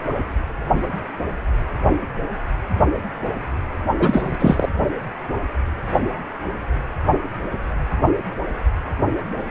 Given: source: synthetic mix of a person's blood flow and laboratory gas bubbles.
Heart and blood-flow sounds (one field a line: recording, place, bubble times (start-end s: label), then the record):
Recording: Doppler ultrasound of blood flow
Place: precordium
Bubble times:
3.99-4.69 s: bubbles
From the record:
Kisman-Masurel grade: 223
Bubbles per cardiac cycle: several, 3 to 8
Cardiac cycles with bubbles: 10 to 50%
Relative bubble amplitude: loud (0.450 to 0.775)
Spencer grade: 2 (many but less than half of the cardiac periods contain bubble signals, singularly or in groups)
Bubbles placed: only in the low amplitude regions of the cardiac cycle